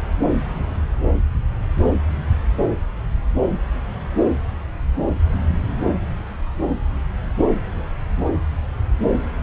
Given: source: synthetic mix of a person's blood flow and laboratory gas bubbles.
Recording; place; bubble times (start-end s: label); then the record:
Doppler ultrasound of blood flow; subclavian vein
no bubbles
From the record:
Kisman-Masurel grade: 000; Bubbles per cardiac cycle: 0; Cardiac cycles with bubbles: 0%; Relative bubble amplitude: no bubbles discernible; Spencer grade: 0 (complete lack of bubble signals)